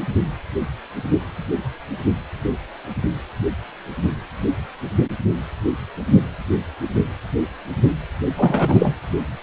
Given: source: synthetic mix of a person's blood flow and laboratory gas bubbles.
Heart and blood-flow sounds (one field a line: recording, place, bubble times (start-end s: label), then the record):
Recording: Doppler ultrasound of blood flow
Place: precordium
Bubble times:
8.27-8.94 s: bubbles
From the record:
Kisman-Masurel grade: 213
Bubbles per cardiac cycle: several, 3 to 8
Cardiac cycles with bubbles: 1 to 10%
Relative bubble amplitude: loud (0.450 to 0.775)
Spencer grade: 1 (occasional bubble signal discernible with the cardiac motion signal, with majority of cardiac periods free of bubbles)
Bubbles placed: anywhere in the cardiac cycle